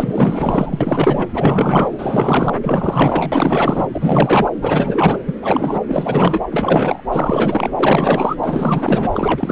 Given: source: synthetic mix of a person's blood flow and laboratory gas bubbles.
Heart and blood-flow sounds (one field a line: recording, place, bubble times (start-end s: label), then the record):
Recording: Doppler ultrasound of blood flow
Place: subclavian vein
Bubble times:
0.00-1.27 s: bubbles
1.33-1.90 s: bubbles
1.98-2.56 s: bubbles
2.62-3.87 s: bubbles
3.93-4.50 s: bubbles
4.61-5.19 s: bubbles
5.26-5.33 s: bubbles
5.42-5.80 s: bubbles
5.86-6.40 s: bubbles
6.51-7.01 s: bubbles
7.11-7.71 s: bubbles
7.75-8.36 s: bubbles
8.42-9.10 s: bubbles
9.12-9.52 s: bubbles
From the record:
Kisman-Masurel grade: 444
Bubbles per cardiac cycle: continuous sound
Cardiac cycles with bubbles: 100%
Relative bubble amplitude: maximal (0.775 to 0.999)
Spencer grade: 4 (maximum detectable bubble signal sounding continuously throughout systole and diastole of every cardiac period, and overriding the amplitude of the normal cardiac signals)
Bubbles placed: anywhere in the cardiac cycle